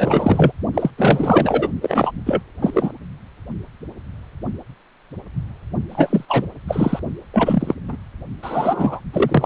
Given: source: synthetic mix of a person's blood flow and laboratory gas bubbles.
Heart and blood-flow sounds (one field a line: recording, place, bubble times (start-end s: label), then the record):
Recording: Doppler ultrasound of blood flow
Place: precordium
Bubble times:
0.00-0.52 s: bubbles
0.74-0.90 s: bubbles
0.97-1.69 s: bubbles
1.82-2.11 s: bubbles
2.25-2.43 s: bubbles
2.62-2.92 s: bubbles
5.89-6.25 s: bubbles
6.28-6.46 s: bubbles
6.67-6.99 s: bubbles
7.33-7.74 s: bubbles
7.88-7.97 s: bubbles
8.42-9.01 s: bubbles
9.13-9.46 s: bubbles
From the record:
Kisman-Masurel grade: 333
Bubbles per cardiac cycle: rolling drumbeat, 9 or more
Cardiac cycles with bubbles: 50 to 99%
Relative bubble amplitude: loud (0.450 to 0.775)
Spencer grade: 3 (all of the cardiac periods contain showers or single bubble signals, but not dominating or overriding the cardiac motion signals)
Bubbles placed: only in the low amplitude regions of the cardiac cycle